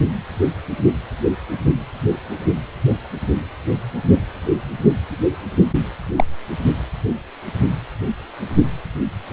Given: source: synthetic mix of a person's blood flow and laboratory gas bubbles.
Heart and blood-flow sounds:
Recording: Doppler ultrasound of blood flow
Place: precordium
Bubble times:
6.16-6.24 s: bubbles
From the record:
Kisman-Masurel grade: 113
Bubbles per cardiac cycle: 1 to 2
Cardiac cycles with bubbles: 1 to 10%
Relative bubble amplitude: loud (0.450 to 0.775)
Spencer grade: 1 (occasional bubble signal discernible with the cardiac motion signal, with majority of cardiac periods free of bubbles)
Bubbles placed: only in the low amplitude regions of the cardiac cycle

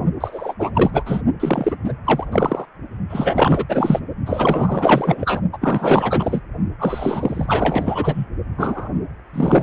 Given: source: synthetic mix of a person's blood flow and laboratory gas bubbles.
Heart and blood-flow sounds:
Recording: Doppler ultrasound of blood flow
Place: precordium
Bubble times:
0.20-0.54 s: bubbles
0.59-0.71 s: bubbles
0.74-0.91 s: bubbles
0.93-1.03 s: bubbles
1.05-1.22 s: bubbles
1.40-1.76 s: bubbles
1.84-1.93 s: bubbles
2.05-2.25 s: bubbles
2.31-2.65 s: bubbles
3.09-3.65 s: bubbles
3.68-4.00 s: bubbles
4.25-5.41 s: bubbles
5.52-5.58 s: bubbles
5.61-6.42 s: bubbles
6.79-8.26 s: bubbles
8.58-8.90 s: bubbles
9.33-9.63 s: bubbles
From the record:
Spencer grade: 4 (maximum detectable bubble signal sounding continuously throughout systole and diastole of every cardiac period, and overriding the amplitude of the normal cardiac signals)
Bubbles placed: only in the low amplitude regions of the cardiac cycle

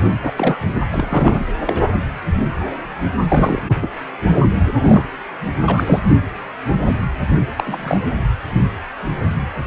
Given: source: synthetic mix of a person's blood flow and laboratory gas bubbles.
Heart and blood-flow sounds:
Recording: Doppler ultrasound of blood flow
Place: precordium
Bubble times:
0.00-0.03 s: bubbles
0.22-0.31 s: bubbles
0.36-0.57 s: bubbles
0.92-1.45 s: bubbles
1.65-1.84 s: bubbles
3.28-3.62 s: bubbles
3.69-3.75 s: bubbles
3.82-3.88 s: bubbles
4.77-5.07 s: bubbles
5.67-6.00 s: bubbles
6.11-6.16 s: bubbles
7.56-8.01 s: bubbles
From the record:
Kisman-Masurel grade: 222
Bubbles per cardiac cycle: several, 3 to 8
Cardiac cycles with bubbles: 10 to 50%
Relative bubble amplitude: moderate (0.250 to 0.450)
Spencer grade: 2 (many but less than half of the cardiac periods contain bubble signals, singularly or in groups)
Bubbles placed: anywhere in the cardiac cycle

